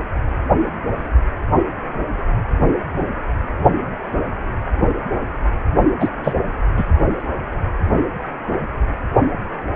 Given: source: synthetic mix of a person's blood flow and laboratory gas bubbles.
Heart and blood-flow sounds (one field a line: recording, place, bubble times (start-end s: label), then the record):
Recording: Doppler ultrasound of blood flow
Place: precordium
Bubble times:
6.00-6.08 s: bubbles
6.22-6.33 s: bubbles
6.76-6.85 s: bubbles
From the record:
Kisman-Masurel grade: 213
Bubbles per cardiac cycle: several, 3 to 8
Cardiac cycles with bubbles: 1 to 10%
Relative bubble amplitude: loud (0.450 to 0.775)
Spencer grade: 1 (occasional bubble signal discernible with the cardiac motion signal, with majority of cardiac periods free of bubbles)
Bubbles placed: only in the low amplitude regions of the cardiac cycle